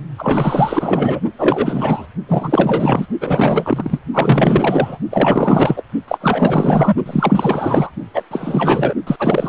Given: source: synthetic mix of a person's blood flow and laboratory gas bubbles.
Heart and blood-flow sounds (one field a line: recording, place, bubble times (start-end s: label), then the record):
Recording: Doppler ultrasound of blood flow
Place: precordium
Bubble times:
0.18-1.20 s: bubbles
1.39-2.06 s: bubbles
2.28-3.06 s: bubbles
3.21-3.99 s: bubbles
4.14-4.98 s: bubbles
5.11-5.83 s: bubbles
6.08-6.95 s: bubbles
7.06-7.90 s: bubbles
8.14-8.22 s: bubbles
8.30-8.94 s: bubbles
9.06-9.16 s: bubbles
9.18-9.49 s: bubbles
From the record:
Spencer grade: 4 (maximum detectable bubble signal sounding continuously throughout systole and diastole of every cardiac period, and overriding the amplitude of the normal cardiac signals)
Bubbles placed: only in the low amplitude regions of the cardiac cycle